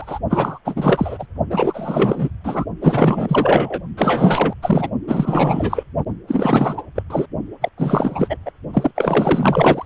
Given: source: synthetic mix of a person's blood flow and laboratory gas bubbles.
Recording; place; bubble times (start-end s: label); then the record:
Doppler ultrasound of blood flow; precordium
0.00-0.19 s: bubbles
0.29-0.59 s: bubbles
0.65-1.26 s: bubbles
1.49-2.29 s: bubbles
2.44-2.65 s: bubbles
2.81-3.81 s: bubbles
3.97-4.54 s: bubbles
4.62-4.90 s: bubbles
5.07-5.83 s: bubbles
6.28-6.83 s: bubbles
6.95-7.03 s: bubbles
7.10-7.26 s: bubbles
7.61-7.70 s: bubbles
7.78-8.38 s: bubbles
8.45-8.51 s: bubbles
8.73-8.91 s: bubbles
8.96-9.86 s: bubbles
From the record:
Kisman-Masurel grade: 444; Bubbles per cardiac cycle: continuous sound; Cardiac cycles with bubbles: 100%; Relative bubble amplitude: maximal (0.775 to 0.999); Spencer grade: 4 (maximum detectable bubble signal sounding continuously throughout systole and diastole of every cardiac period, and overriding the amplitude of the normal cardiac signals); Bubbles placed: only in the low amplitude regions of the cardiac cycle